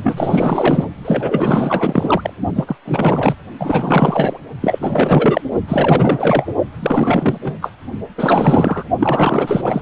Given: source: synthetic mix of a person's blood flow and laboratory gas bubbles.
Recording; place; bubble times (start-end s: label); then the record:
Doppler ultrasound of blood flow; precordium
0.02-0.86 s: bubbles
1.04-2.33 s: bubbles
2.55-2.76 s: bubbles
2.85-3.35 s: bubbles
3.59-4.38 s: bubbles
4.61-5.41 s: bubbles
5.68-6.52 s: bubbles
6.79-7.38 s: bubbles
7.42-7.59 s: bubbles
7.61-7.72 s: bubbles
8.17-8.83 s: bubbles
8.99-9.81 s: bubbles
From the record:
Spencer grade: 4 (maximum detectable bubble signal sounding continuously throughout systole and diastole of every cardiac period, and overriding the amplitude of the normal cardiac signals); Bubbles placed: only in the low amplitude regions of the cardiac cycle